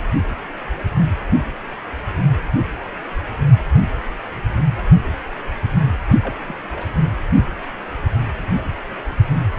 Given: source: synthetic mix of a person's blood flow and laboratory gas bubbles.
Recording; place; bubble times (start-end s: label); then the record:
Doppler ultrasound of blood flow; precordium
6.22-6.36 s: bubbles
6.46-6.57 s: bubbles
6.71-7.02 s: bubbles
From the record:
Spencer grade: 2 (many but less than half of the cardiac periods contain bubble signals, singularly or in groups); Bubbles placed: only in the low amplitude regions of the cardiac cycle